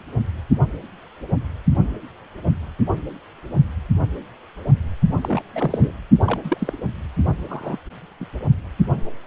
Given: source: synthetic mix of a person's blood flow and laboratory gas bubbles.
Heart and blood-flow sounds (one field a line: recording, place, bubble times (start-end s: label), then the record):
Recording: Doppler ultrasound of blood flow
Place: precordium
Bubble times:
5.21-5.42 s: bubbles
5.55-5.92 s: bubbles
6.25-6.40 s: bubbles
6.44-6.73 s: bubbles
7.48-7.77 s: bubbles
8.20-8.25 s: bubbles
From the record:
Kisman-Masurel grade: 232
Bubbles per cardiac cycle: several, 3 to 8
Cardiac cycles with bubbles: 50 to 99%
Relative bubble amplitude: moderate (0.250 to 0.450)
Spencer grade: 3 (all of the cardiac periods contain showers or single bubble signals, but not dominating or overriding the cardiac motion signals)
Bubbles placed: only in the low amplitude regions of the cardiac cycle